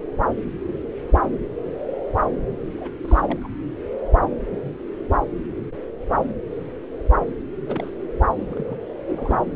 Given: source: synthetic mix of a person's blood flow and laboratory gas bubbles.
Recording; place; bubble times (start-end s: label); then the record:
Doppler ultrasound of blood flow; subclavian vein
2.77-2.90 s: bubbles
3.04-3.21 s: bubbles
3.23-3.48 s: bubbles
7.67-7.90 s: bubbles
8.51-8.76 s: bubbles
9.07-9.47 s: bubbles
From the record:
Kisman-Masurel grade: 221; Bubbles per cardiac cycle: several, 3 to 8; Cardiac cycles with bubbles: 10 to 50%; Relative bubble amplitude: barely perceptible (0.100 to 0.250); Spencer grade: 2 (many but less than half of the cardiac periods contain bubble signals, singularly or in groups); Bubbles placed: anywhere in the cardiac cycle